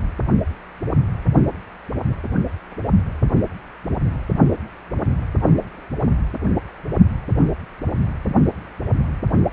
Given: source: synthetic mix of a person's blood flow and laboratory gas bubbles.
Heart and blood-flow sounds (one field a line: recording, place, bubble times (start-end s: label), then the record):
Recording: Doppler ultrasound of blood flow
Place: precordium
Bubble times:
no bubbles
From the record:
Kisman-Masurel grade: 000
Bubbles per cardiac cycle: 0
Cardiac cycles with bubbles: 0%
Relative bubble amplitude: no bubbles discernible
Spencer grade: 0 (complete lack of bubble signals)